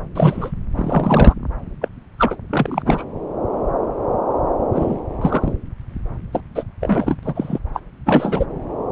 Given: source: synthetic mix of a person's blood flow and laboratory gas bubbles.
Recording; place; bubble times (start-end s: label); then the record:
Doppler ultrasound of blood flow; subclavian vein
0.16-0.51 s: bubbles
0.75-1.34 s: bubbles
1.81-1.88 s: bubbles
2.17-2.36 s: bubbles
2.50-2.82 s: bubbles
2.85-3.04 s: bubbles
4.72-4.97 s: bubbles
5.21-5.53 s: bubbles
6.32-6.42 s: bubbles
6.55-6.64 s: bubbles
6.80-7.16 s: bubbles
7.23-7.59 s: bubbles
7.73-7.80 s: bubbles
8.05-8.45 s: bubbles
From the record:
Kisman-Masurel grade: 233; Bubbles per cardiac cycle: several, 3 to 8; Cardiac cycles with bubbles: 50 to 99%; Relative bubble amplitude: loud (0.450 to 0.775); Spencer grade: 3 (all of the cardiac periods contain showers or single bubble signals, but not dominating or overriding the cardiac motion signals); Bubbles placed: anywhere in the cardiac cycle